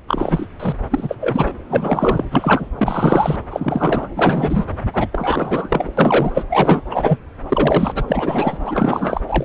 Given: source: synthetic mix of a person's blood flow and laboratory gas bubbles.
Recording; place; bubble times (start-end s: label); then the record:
Doppler ultrasound of blood flow; subclavian vein
0.08-0.47 s: bubbles
0.59-0.78 s: bubbles
0.90-1.17 s: bubbles
1.20-1.51 s: bubbles
1.69-2.25 s: bubbles
2.30-2.69 s: bubbles
2.78-3.37 s: bubbles
3.51-4.09 s: bubbles
4.15-4.65 s: bubbles
4.93-5.07 s: bubbles
5.12-5.93 s: bubbles
5.97-6.30 s: bubbles
6.33-6.44 s: bubbles
6.50-6.82 s: bubbles
6.90-7.18 s: bubbles
7.50-8.05 s: bubbles
8.07-8.57 s: bubbles
8.65-9.21 s: bubbles
9.27-9.45 s: bubbles
From the record:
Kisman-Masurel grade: 343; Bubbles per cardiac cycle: rolling drumbeat, 9 or more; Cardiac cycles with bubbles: 100%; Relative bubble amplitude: loud (0.450 to 0.775); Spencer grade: 3 (all of the cardiac periods contain showers or single bubble signals, but not dominating or overriding the cardiac motion signals); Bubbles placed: anywhere in the cardiac cycle